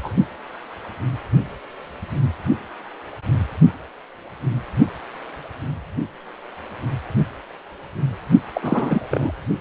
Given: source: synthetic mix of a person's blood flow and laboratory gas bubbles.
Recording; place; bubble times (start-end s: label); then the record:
Doppler ultrasound of blood flow; precordium
0.00-0.14 s: bubbles
8.54-9.08 s: bubbles
9.11-9.32 s: bubbles
From the record:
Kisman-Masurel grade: 222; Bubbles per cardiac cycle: several, 3 to 8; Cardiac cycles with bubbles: 10 to 50%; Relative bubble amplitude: moderate (0.250 to 0.450); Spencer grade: 2 (many but less than half of the cardiac periods contain bubble signals, singularly or in groups); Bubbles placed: only in the low amplitude regions of the cardiac cycle